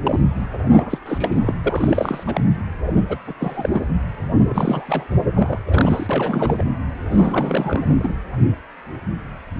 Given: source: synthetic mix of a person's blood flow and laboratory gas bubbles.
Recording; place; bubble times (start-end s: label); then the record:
Doppler ultrasound of blood flow; precordium
0.04-0.22 s: bubbles
0.53-0.58 s: bubbles
0.75-0.98 s: bubbles
1.05-1.53 s: bubbles
1.65-2.23 s: bubbles
2.27-2.41 s: bubbles
2.86-3.04 s: bubbles
3.09-3.17 s: bubbles
3.26-3.33 s: bubbles
3.40-3.81 s: bubbles
4.49-5.07 s: bubbles
5.34-5.58 s: bubbles
5.67-6.62 s: bubbles
7.10-7.94 s: bubbles
7.98-8.15 s: bubbles
From the record:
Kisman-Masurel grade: 332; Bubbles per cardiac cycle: rolling drumbeat, 9 or more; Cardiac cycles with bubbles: 50 to 99%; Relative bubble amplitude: moderate (0.250 to 0.450); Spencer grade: 3 (all of the cardiac periods contain showers or single bubble signals, but not dominating or overriding the cardiac motion signals); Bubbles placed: anywhere in the cardiac cycle